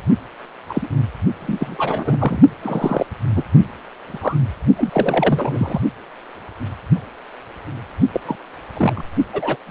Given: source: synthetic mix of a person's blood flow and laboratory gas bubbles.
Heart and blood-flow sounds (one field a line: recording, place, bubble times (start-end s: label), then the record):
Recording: Doppler ultrasound of blood flow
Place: precordium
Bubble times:
0.69-0.88 s: bubbles
1.40-2.39 s: bubbles
2.62-3.06 s: bubbles
3.34-3.43 s: bubbles
4.06-4.38 s: bubbles
4.76-5.80 s: bubbles
8.13-8.21 s: bubbles
8.25-8.36 s: bubbles
8.74-9.04 s: bubbles
9.33-9.57 s: bubbles
9.67-9.70 s: bubbles
From the record:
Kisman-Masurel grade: 232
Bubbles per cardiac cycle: several, 3 to 8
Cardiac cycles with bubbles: 50 to 99%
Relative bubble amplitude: moderate (0.250 to 0.450)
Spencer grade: 3 (all of the cardiac periods contain showers or single bubble signals, but not dominating or overriding the cardiac motion signals)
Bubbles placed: only in the low amplitude regions of the cardiac cycle